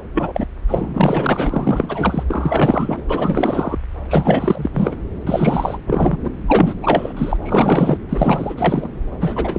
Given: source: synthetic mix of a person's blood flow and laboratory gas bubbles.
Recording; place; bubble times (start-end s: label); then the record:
Doppler ultrasound of blood flow; subclavian vein
0.13-0.46 s: bubbles
0.68-2.24 s: bubbles
2.28-3.02 s: bubbles
3.08-3.78 s: bubbles
4.08-4.70 s: bubbles
4.74-4.96 s: bubbles
5.26-5.78 s: bubbles
5.86-6.17 s: bubbles
6.23-6.28 s: bubbles
6.47-6.74 s: bubbles
6.81-7.13 s: bubbles
7.17-7.37 s: bubbles
7.42-7.98 s: bubbles
8.09-8.54 s: bubbles
8.58-8.88 s: bubbles
9.20-9.58 s: bubbles
From the record:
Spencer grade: 4 (maximum detectable bubble signal sounding continuously throughout systole and diastole of every cardiac period, and overriding the amplitude of the normal cardiac signals); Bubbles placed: anywhere in the cardiac cycle